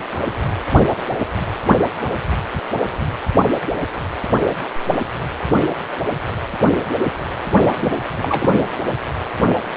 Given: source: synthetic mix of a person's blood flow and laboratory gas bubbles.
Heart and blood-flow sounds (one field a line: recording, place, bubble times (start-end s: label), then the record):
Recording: Doppler ultrasound of blood flow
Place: precordium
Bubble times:
7.81-7.96 s: bubbles
8.17-8.54 s: bubbles
From the record:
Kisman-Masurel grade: 222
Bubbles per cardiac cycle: several, 3 to 8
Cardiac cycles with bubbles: 10 to 50%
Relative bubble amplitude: moderate (0.250 to 0.450)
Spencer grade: 2 (many but less than half of the cardiac periods contain bubble signals, singularly or in groups)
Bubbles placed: anywhere in the cardiac cycle